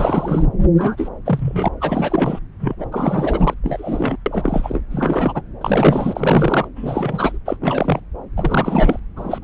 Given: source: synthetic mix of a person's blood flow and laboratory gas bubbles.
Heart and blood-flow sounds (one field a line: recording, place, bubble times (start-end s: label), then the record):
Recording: Doppler ultrasound of blood flow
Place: subclavian vein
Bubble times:
0.00-0.42 s: bubbles
0.78-1.08 s: bubbles
1.25-1.68 s: bubbles
1.80-2.39 s: bubbles
2.60-2.75 s: bubbles
2.79-2.86 s: bubbles
2.92-3.54 s: bubbles
3.63-4.16 s: bubbles
4.26-4.81 s: bubbles
4.91-5.42 s: bubbles
5.61-6.68 s: bubbles
6.76-7.38 s: bubbles
7.46-7.56 s: bubbles
7.60-8.00 s: bubbles
8.36-8.99 s: bubbles
9.16-9.38 s: bubbles
9.41-9.44 s: bubbles
From the record:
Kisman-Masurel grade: 343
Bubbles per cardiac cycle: rolling drumbeat, 9 or more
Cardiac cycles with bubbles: 100%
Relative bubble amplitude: loud (0.450 to 0.775)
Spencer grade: 3 (all of the cardiac periods contain showers or single bubble signals, but not dominating or overriding the cardiac motion signals)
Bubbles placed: anywhere in the cardiac cycle